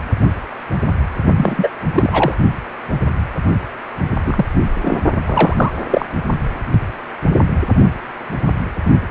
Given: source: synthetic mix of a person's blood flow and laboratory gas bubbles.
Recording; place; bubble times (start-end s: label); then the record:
Doppler ultrasound of blood flow; precordium
1.36-1.69 s: bubbles
1.95-2.34 s: bubbles
4.25-4.45 s: bubbles
4.82-5.00 s: bubbles
5.25-5.72 s: bubbles
5.91-6.05 s: bubbles
From the record:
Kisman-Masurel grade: 223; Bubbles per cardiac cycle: several, 3 to 8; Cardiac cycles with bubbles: 10 to 50%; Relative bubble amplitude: loud (0.450 to 0.775); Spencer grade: 2 (many but less than half of the cardiac periods contain bubble signals, singularly or in groups); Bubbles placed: only in the low amplitude regions of the cardiac cycle